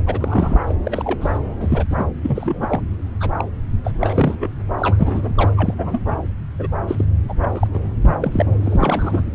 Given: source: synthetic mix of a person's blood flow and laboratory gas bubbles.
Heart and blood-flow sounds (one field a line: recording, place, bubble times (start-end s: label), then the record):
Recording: Doppler ultrasound of blood flow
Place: subclavian vein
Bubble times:
0.06-0.59 s: bubbles
0.66-0.75 s: bubbles
0.83-1.38 s: bubbles
1.60-1.84 s: bubbles
1.90-2.05 s: bubbles
2.22-2.80 s: bubbles
3.20-3.30 s: bubbles
3.36-3.44 s: bubbles
3.84-3.92 s: bubbles
3.99-4.37 s: bubbles
4.41-4.49 s: bubbles
4.78-5.51 s: bubbles
5.56-5.74 s: bubbles
5.78-6.02 s: bubbles
6.04-6.16 s: bubbles
6.58-6.68 s: bubbles
6.88-7.04 s: bubbles
7.29-7.35 s: bubbles
7.41-7.68 s: bubbles
7.73-7.79 s: bubbles
8.03-8.18 s: bubbles
8.20-8.56 s: bubbles
8.61-9.23 s: bubbles
From the record:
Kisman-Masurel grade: 242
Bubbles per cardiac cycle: several, 3 to 8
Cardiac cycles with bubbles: 100%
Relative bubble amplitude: moderate (0.250 to 0.450)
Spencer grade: 3 (all of the cardiac periods contain showers or single bubble signals, but not dominating or overriding the cardiac motion signals)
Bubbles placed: anywhere in the cardiac cycle